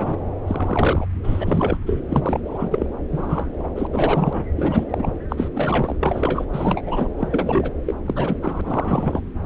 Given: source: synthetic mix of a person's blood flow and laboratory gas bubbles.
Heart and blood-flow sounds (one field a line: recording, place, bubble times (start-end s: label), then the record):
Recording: Doppler ultrasound of blood flow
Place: subclavian vein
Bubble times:
0.00-0.17 s: bubbles
0.47-1.06 s: bubbles
1.23-1.77 s: bubbles
1.86-2.00 s: bubbles
2.08-2.40 s: bubbles
2.45-2.87 s: bubbles
3.12-3.52 s: bubbles
3.58-3.68 s: bubbles
3.75-3.87 s: bubbles
3.91-4.43 s: bubbles
4.56-4.85 s: bubbles
4.89-5.12 s: bubbles
5.30-5.48 s: bubbles
5.55-5.96 s: bubbles
6.00-6.45 s: bubbles
6.52-6.81 s: bubbles
6.85-7.08 s: bubbles
7.17-7.72 s: bubbles
7.86-7.94 s: bubbles
8.06-8.37 s: bubbles
8.42-8.62 s: bubbles
8.65-9.21 s: bubbles
9.43-9.46 s: bubbles
From the record:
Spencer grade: 3 (all of the cardiac periods contain showers or single bubble signals, but not dominating or overriding the cardiac motion signals)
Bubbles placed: anywhere in the cardiac cycle